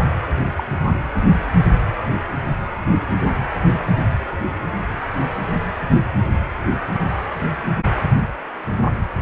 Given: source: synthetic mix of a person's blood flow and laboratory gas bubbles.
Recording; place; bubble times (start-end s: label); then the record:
Doppler ultrasound of blood flow; precordium
0.55-0.64 s: bubbles
0.86-0.93 s: bubbles
From the record:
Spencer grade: 1 (occasional bubble signal discernible with the cardiac motion signal, with majority of cardiac periods free of bubbles); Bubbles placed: anywhere in the cardiac cycle